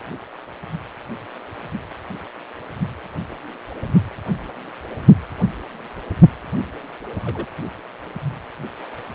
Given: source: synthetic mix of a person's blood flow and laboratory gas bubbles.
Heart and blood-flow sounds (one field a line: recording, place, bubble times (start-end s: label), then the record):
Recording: Doppler ultrasound of blood flow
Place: precordium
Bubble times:
7.25-7.48 s: bubbles
From the record:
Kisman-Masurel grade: 121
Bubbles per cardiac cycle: 1 to 2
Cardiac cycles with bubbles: 10 to 50%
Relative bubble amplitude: barely perceptible (0.100 to 0.250)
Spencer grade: 2 (many but less than half of the cardiac periods contain bubble signals, singularly or in groups)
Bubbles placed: anywhere in the cardiac cycle